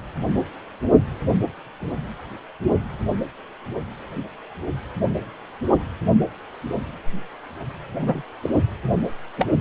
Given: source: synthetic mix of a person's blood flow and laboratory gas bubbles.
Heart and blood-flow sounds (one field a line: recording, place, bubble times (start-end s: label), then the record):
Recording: Doppler ultrasound of blood flow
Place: precordium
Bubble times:
8.00-8.22 s: bubbles
8.43-8.50 s: bubbles
9.37-9.46 s: bubbles
From the record:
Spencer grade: 2 (many but less than half of the cardiac periods contain bubble signals, singularly or in groups)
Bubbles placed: anywhere in the cardiac cycle